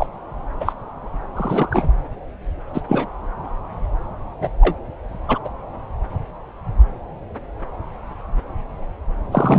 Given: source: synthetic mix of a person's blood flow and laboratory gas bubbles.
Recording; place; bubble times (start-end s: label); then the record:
Doppler ultrasound of blood flow; subclavian vein
0.00-0.07 s: bubbles
0.59-0.72 s: bubbles
1.35-1.92 s: bubbles
2.74-2.81 s: bubbles
2.88-3.06 s: bubbles
4.41-4.50 s: bubbles
4.60-4.76 s: bubbles
5.28-5.38 s: bubbles
5.44-5.49 s: bubbles
9.32-9.59 s: bubbles
From the record:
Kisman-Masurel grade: 223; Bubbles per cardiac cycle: several, 3 to 8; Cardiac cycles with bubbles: 10 to 50%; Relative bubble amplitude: loud (0.450 to 0.775); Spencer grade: 2 (many but less than half of the cardiac periods contain bubble signals, singularly or in groups); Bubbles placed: anywhere in the cardiac cycle